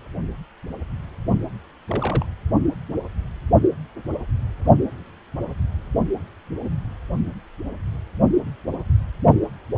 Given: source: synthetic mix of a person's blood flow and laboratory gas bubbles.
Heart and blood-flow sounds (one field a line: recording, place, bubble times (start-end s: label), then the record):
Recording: Doppler ultrasound of blood flow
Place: precordium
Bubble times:
1.88-2.26 s: bubbles
From the record:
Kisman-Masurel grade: 121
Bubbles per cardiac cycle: 1 to 2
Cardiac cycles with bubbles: 10 to 50%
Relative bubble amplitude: barely perceptible (0.100 to 0.250)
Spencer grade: 2 (many but less than half of the cardiac periods contain bubble signals, singularly or in groups)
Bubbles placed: only in the low amplitude regions of the cardiac cycle